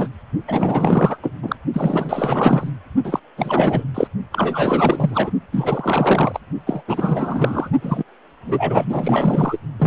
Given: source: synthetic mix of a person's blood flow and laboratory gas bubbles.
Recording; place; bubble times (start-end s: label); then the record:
Doppler ultrasound of blood flow; precordium
0.00-0.08 s: bubbles
0.47-1.17 s: bubbles
1.23-1.32 s: bubbles
1.42-1.55 s: bubbles
1.73-2.71 s: bubbles
3.04-3.20 s: bubbles
3.37-3.88 s: bubbles
3.94-4.08 s: bubbles
4.32-5.30 s: bubbles
5.52-6.40 s: bubbles
6.66-6.82 s: bubbles
6.87-7.70 s: bubbles
7.81-8.04 s: bubbles
8.46-9.59 s: bubbles
9.79-9.87 s: bubbles
From the record:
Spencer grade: 4 (maximum detectable bubble signal sounding continuously throughout systole and diastole of every cardiac period, and overriding the amplitude of the normal cardiac signals); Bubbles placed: only in the low amplitude regions of the cardiac cycle